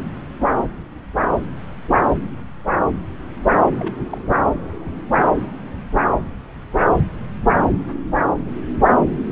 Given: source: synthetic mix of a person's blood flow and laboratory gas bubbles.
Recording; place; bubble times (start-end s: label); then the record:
Doppler ultrasound of blood flow; subclavian vein
3.79-3.94 s: bubbles
4.10-4.21 s: bubbles
From the record:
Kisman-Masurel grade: 111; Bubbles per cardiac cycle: 1 to 2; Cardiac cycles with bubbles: 1 to 10%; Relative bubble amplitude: barely perceptible (0.100 to 0.250); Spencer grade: 1 (occasional bubble signal discernible with the cardiac motion signal, with majority of cardiac periods free of bubbles); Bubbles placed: anywhere in the cardiac cycle